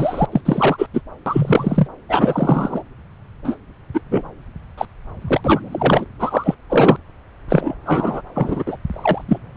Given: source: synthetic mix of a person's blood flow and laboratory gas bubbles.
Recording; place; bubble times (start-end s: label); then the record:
Doppler ultrasound of blood flow; subclavian vein
0.00-0.26 s: bubbles
0.32-0.41 s: bubbles
0.45-0.86 s: bubbles
0.93-1.01 s: bubbles
1.26-1.87 s: bubbles
2.08-2.83 s: bubbles
3.44-3.56 s: bubbles
3.94-4.01 s: bubbles
4.10-4.22 s: bubbles
4.77-4.85 s: bubbles
5.21-5.40 s: bubbles
5.44-6.05 s: bubbles
6.19-6.54 s: bubbles
6.69-6.97 s: bubbles
7.48-7.75 s: bubbles
7.85-8.21 s: bubbles
8.35-8.63 s: bubbles
8.67-8.77 s: bubbles
8.90-9.25 s: bubbles
9.28-9.38 s: bubbles
From the record:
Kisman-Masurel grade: 243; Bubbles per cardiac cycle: several, 3 to 8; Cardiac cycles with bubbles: 100%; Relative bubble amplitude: loud (0.450 to 0.775); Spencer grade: 3 (all of the cardiac periods contain showers or single bubble signals, but not dominating or overriding the cardiac motion signals); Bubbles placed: anywhere in the cardiac cycle